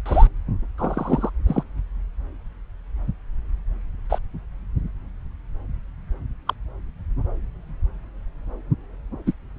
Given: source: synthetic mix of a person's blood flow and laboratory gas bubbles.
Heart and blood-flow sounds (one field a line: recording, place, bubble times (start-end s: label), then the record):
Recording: Doppler ultrasound of blood flow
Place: subclavian vein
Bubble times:
0.05-0.27 s: bubbles
0.78-1.29 s: bubbles
1.47-1.64 s: bubbles
4.10-4.19 s: bubbles
6.47-6.54 s: bubbles
9.26-9.33 s: bubbles
From the record:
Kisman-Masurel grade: 122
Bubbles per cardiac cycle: 1 to 2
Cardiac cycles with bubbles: 10 to 50%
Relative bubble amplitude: moderate (0.250 to 0.450)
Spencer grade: 2 (many but less than half of the cardiac periods contain bubble signals, singularly or in groups)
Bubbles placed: anywhere in the cardiac cycle